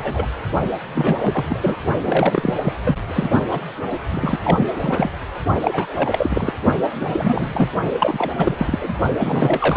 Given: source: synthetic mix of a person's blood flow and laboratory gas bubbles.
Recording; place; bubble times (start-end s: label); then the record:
Doppler ultrasound of blood flow; precordium
0.00-0.27 s: bubbles
0.94-1.45 s: bubbles
1.49-1.76 s: bubbles
2.04-2.54 s: bubbles
2.62-2.73 s: bubbles
2.85-2.96 s: bubbles
3.07-3.29 s: bubbles
3.49-3.62 s: bubbles
3.90-3.99 s: bubbles
4.08-4.39 s: bubbles
4.43-4.72 s: bubbles
4.80-5.10 s: bubbles
5.63-6.53 s: bubbles
7.00-7.70 s: bubbles
7.99-8.31 s: bubbles
8.36-8.94 s: bubbles
9.19-9.77 s: bubbles
From the record:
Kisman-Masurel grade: 333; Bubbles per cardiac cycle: rolling drumbeat, 9 or more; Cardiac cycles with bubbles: 50 to 99%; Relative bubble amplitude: loud (0.450 to 0.775); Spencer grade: 3 (all of the cardiac periods contain showers or single bubble signals, but not dominating or overriding the cardiac motion signals); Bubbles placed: only in the low amplitude regions of the cardiac cycle